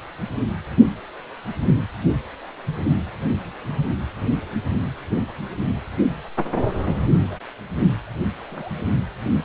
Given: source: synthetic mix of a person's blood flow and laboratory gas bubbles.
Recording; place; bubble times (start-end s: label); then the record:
Doppler ultrasound of blood flow; precordium
7.29-7.37 s: bubbles
8.49-8.73 s: bubbles
From the record:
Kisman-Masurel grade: 121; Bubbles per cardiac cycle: 1 to 2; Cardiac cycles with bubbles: 10 to 50%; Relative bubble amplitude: barely perceptible (0.100 to 0.250); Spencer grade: 2 (many but less than half of the cardiac periods contain bubble signals, singularly or in groups); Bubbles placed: anywhere in the cardiac cycle